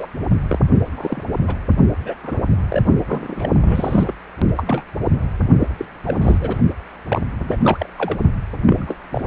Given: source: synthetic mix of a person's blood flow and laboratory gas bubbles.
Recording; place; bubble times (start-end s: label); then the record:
Doppler ultrasound of blood flow; precordium
0.00-0.08 s: bubbles
0.47-0.59 s: bubbles
0.96-1.24 s: bubbles
1.48-1.55 s: bubbles
2.04-2.15 s: bubbles
2.23-2.40 s: bubbles
2.69-2.82 s: bubbles
3.05-3.51 s: bubbles
3.61-4.12 s: bubbles
4.56-4.62 s: bubbles
4.66-4.83 s: bubbles
5.58-5.67 s: bubbles
5.78-5.85 s: bubbles
6.04-6.18 s: bubbles
6.21-6.38 s: bubbles
6.41-6.60 s: bubbles
7.08-7.21 s: bubbles
7.38-7.58 s: bubbles
7.62-7.89 s: bubbles
7.98-8.17 s: bubbles
8.66-8.95 s: bubbles
9.11-9.21 s: bubbles
From the record:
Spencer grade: 3 (all of the cardiac periods contain showers or single bubble signals, but not dominating or overriding the cardiac motion signals); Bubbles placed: only in the low amplitude regions of the cardiac cycle